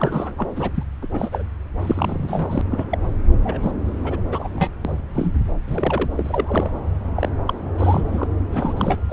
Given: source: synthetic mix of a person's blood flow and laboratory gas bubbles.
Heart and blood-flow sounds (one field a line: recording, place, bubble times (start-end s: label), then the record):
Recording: Doppler ultrasound of blood flow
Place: subclavian vein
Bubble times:
0.00-0.32 s: bubbles
0.38-0.47 s: bubbles
0.55-0.72 s: bubbles
0.75-0.83 s: bubbles
1.02-1.07 s: bubbles
1.12-1.43 s: bubbles
1.79-2.62 s: bubbles
2.71-2.85 s: bubbles
2.91-2.98 s: bubbles
3.29-3.33 s: bubbles
3.44-3.71 s: bubbles
4.04-4.21 s: bubbles
4.32-4.50 s: bubbles
4.54-4.68 s: bubbles
4.84-5.00 s: bubbles
5.14-5.38 s: bubbles
5.67-6.11 s: bubbles
6.16-6.70 s: bubbles
7.16-7.29 s: bubbles
7.47-7.54 s: bubbles
7.78-8.04 s: bubbles
8.12-8.27 s: bubbles
8.52-8.74 s: bubbles
8.77-8.96 s: bubbles
9.09-9.13 s: bubbles
From the record:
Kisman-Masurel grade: 242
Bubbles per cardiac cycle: several, 3 to 8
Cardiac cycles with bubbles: 100%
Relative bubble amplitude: moderate (0.250 to 0.450)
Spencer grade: 3 (all of the cardiac periods contain showers or single bubble signals, but not dominating or overriding the cardiac motion signals)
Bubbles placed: anywhere in the cardiac cycle